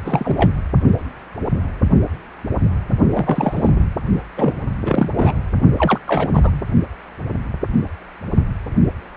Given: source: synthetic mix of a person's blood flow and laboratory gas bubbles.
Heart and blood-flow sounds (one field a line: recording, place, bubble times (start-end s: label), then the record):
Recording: Doppler ultrasound of blood flow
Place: precordium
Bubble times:
0.05-0.51 s: bubbles
3.11-3.69 s: bubbles
3.75-3.80 s: bubbles
4.37-4.53 s: bubbles
4.85-5.10 s: bubbles
5.16-5.33 s: bubbles
5.78-5.98 s: bubbles
6.07-6.30 s: bubbles
6.33-6.62 s: bubbles
From the record:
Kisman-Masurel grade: 232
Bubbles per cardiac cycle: several, 3 to 8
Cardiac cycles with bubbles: 50 to 99%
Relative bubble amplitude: moderate (0.250 to 0.450)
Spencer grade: 3 (all of the cardiac periods contain showers or single bubble signals, but not dominating or overriding the cardiac motion signals)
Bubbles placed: only in the low amplitude regions of the cardiac cycle